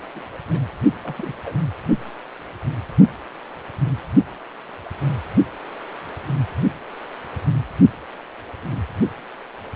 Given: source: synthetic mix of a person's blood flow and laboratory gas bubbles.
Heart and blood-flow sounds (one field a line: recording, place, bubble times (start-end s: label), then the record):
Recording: Doppler ultrasound of blood flow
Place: precordium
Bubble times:
0.15-0.20 s: bubbles
0.50-0.59 s: bubbles
1.03-1.15 s: bubbles
1.17-1.32 s: bubbles
1.43-1.58 s: bubbles
From the record:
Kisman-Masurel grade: 221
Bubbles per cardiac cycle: several, 3 to 8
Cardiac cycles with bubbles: 10 to 50%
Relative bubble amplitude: barely perceptible (0.100 to 0.250)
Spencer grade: 2 (many but less than half of the cardiac periods contain bubble signals, singularly or in groups)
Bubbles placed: anywhere in the cardiac cycle